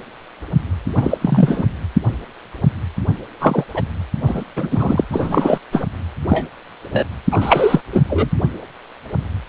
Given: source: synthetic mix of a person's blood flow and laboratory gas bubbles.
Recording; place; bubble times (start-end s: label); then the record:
Doppler ultrasound of blood flow; precordium
0.95-1.18 s: bubbles
1.21-1.66 s: bubbles
3.40-3.65 s: bubbles
3.74-3.82 s: bubbles
4.26-4.44 s: bubbles
4.56-5.04 s: bubbles
5.11-5.59 s: bubbles
5.72-5.86 s: bubbles
6.28-6.48 s: bubbles
6.92-7.06 s: bubbles
7.30-7.81 s: bubbles
7.92-8.01 s: bubbles
8.09-8.29 s: bubbles
From the record:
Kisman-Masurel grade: 233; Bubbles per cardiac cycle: several, 3 to 8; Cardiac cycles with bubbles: 50 to 99%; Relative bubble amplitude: loud (0.450 to 0.775); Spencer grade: 3 (all of the cardiac periods contain showers or single bubble signals, but not dominating or overriding the cardiac motion signals); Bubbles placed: anywhere in the cardiac cycle